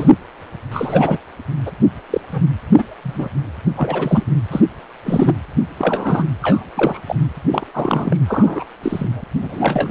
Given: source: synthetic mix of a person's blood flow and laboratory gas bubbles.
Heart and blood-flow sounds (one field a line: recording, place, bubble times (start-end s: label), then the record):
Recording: Doppler ultrasound of blood flow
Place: precordium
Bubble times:
0.00-0.09 s: bubbles
0.71-1.19 s: bubbles
1.66-1.72 s: bubbles
2.10-2.21 s: bubbles
2.33-2.43 s: bubbles
2.77-2.83 s: bubbles
3.03-3.29 s: bubbles
3.77-4.24 s: bubbles
4.51-4.61 s: bubbles
5.05-5.33 s: bubbles
5.79-6.24 s: bubbles
6.42-6.65 s: bubbles
6.75-7.00 s: bubbles
7.06-7.16 s: bubbles
7.50-7.66 s: bubbles
7.74-8.17 s: bubbles
8.27-8.66 s: bubbles
8.82-9.24 s: bubbles
9.40-9.90 s: bubbles
From the record:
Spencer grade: 3 (all of the cardiac periods contain showers or single bubble signals, but not dominating or overriding the cardiac motion signals)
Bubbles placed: anywhere in the cardiac cycle